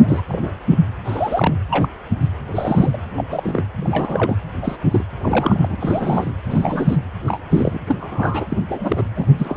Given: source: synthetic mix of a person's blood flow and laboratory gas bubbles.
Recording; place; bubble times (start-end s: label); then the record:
Doppler ultrasound of blood flow; precordium
0.00-0.24 s: bubbles
0.28-0.52 s: bubbles
0.71-0.78 s: bubbles
1.04-1.54 s: bubbles
1.71-1.89 s: bubbles
2.20-2.30 s: bubbles
2.52-2.97 s: bubbles
3.16-3.24 s: bubbles
3.30-3.64 s: bubbles
3.77-4.38 s: bubbles
4.62-4.76 s: bubbles
4.91-5.04 s: bubbles
5.23-5.77 s: bubbles
5.80-6.32 s: bubbles
6.45-6.98 s: bubbles
7.26-7.37 s: bubbles
7.49-7.80 s: bubbles
7.87-8.45 s: bubbles
8.50-8.57 s: bubbles
8.68-9.03 s: bubbles
9.15-9.26 s: bubbles
9.38-9.57 s: bubbles
From the record:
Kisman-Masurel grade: 242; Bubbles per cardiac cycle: several, 3 to 8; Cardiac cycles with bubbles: 100%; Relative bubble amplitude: moderate (0.250 to 0.450); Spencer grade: 3 (all of the cardiac periods contain showers or single bubble signals, but not dominating or overriding the cardiac motion signals); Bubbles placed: anywhere in the cardiac cycle